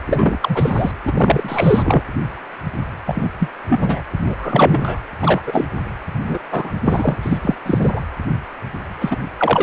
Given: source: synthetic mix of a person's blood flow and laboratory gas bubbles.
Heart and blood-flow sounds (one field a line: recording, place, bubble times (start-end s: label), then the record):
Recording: Doppler ultrasound of blood flow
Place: precordium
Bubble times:
0.07-0.91 s: bubbles
1.04-2.03 s: bubbles
3.06-3.30 s: bubbles
3.39-3.49 s: bubbles
3.69-4.01 s: bubbles
4.25-5.00 s: bubbles
5.21-5.41 s: bubbles
5.46-5.66 s: bubbles
6.27-6.39 s: bubbles
6.52-6.73 s: bubbles
6.84-7.16 s: bubbles
7.23-7.38 s: bubbles
7.42-7.54 s: bubbles
7.66-8.00 s: bubbles
9.00-9.17 s: bubbles
9.38-9.63 s: bubbles
From the record:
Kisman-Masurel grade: 233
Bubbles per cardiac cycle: several, 3 to 8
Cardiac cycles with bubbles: 50 to 99%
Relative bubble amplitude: loud (0.450 to 0.775)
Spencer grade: 3 (all of the cardiac periods contain showers or single bubble signals, but not dominating or overriding the cardiac motion signals)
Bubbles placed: anywhere in the cardiac cycle